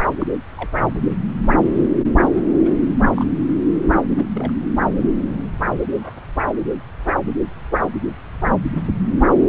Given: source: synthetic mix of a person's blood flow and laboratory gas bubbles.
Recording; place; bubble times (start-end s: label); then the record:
Doppler ultrasound of blood flow; subclavian vein
0.19-0.27 s: bubbles
0.57-0.70 s: bubbles
2.64-2.71 s: bubbles
3.15-3.25 s: bubbles
4.17-4.25 s: bubbles
4.36-4.53 s: bubbles
5.87-6.18 s: bubbles
7.07-7.14 s: bubbles
From the record:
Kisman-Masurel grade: 121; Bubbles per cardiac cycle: 1 to 2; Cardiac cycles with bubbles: 10 to 50%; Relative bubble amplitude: barely perceptible (0.100 to 0.250); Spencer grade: 2 (many but less than half of the cardiac periods contain bubble signals, singularly or in groups); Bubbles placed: anywhere in the cardiac cycle